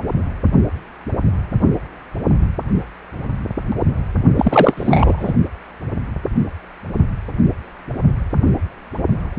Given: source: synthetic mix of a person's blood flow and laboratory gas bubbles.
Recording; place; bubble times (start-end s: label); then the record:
Doppler ultrasound of blood flow; precordium
4.36-4.74 s: bubbles
4.77-5.33 s: bubbles
From the record:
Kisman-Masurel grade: 213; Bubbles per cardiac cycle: several, 3 to 8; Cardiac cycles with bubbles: 1 to 10%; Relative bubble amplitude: loud (0.450 to 0.775); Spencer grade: 1 (occasional bubble signal discernible with the cardiac motion signal, with majority of cardiac periods free of bubbles); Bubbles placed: only in the low amplitude regions of the cardiac cycle